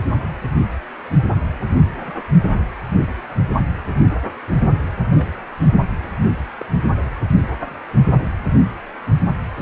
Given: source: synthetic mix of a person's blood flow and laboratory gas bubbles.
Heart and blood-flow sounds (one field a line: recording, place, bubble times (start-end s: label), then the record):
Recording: Doppler ultrasound of blood flow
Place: precordium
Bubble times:
2.06-2.11 s: bubbles
5.13-5.34 s: bubbles
6.03-6.08 s: bubbles
6.60-6.66 s: bubbles
From the record:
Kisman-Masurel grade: 121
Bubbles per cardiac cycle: 1 to 2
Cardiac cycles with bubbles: 10 to 50%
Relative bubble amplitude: barely perceptible (0.100 to 0.250)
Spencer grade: 2 (many but less than half of the cardiac periods contain bubble signals, singularly or in groups)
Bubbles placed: only in the low amplitude regions of the cardiac cycle